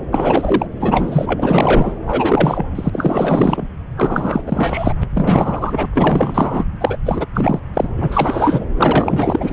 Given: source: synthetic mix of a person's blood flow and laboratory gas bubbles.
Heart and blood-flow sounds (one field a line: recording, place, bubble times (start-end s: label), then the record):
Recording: Doppler ultrasound of blood flow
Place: subclavian vein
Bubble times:
0.11-0.67 s: bubbles
0.80-1.93 s: bubbles
2.05-2.67 s: bubbles
2.75-3.66 s: bubbles
3.96-4.42 s: bubbles
4.46-4.94 s: bubbles
5.13-5.87 s: bubbles
5.94-6.65 s: bubbles
6.80-6.97 s: bubbles
7.04-7.25 s: bubbles
7.34-7.59 s: bubbles
7.73-7.88 s: bubbles
7.96-8.65 s: bubbles
8.77-9.53 s: bubbles
From the record:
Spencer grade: 4 (maximum detectable bubble signal sounding continuously throughout systole and diastole of every cardiac period, and overriding the amplitude of the normal cardiac signals)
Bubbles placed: anywhere in the cardiac cycle